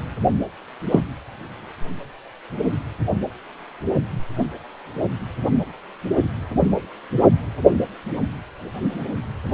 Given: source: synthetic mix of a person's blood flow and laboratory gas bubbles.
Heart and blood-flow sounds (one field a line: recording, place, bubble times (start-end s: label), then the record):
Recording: Doppler ultrasound of blood flow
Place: precordium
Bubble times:
0.91-1.00 s: bubbles
From the record:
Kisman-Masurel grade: 113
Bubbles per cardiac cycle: 1 to 2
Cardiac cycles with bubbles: 1 to 10%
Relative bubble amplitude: loud (0.450 to 0.775)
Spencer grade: 1 (occasional bubble signal discernible with the cardiac motion signal, with majority of cardiac periods free of bubbles)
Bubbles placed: anywhere in the cardiac cycle